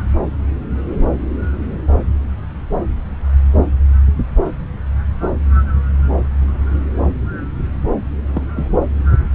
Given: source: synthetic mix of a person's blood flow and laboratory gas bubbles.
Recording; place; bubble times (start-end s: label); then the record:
Doppler ultrasound of blood flow; subclavian vein
8.33-8.46 s: bubbles
8.55-8.68 s: bubbles
From the record:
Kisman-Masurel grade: 112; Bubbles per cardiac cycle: 1 to 2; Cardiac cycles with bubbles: 1 to 10%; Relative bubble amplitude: moderate (0.250 to 0.450); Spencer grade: 1 (occasional bubble signal discernible with the cardiac motion signal, with majority of cardiac periods free of bubbles); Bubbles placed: anywhere in the cardiac cycle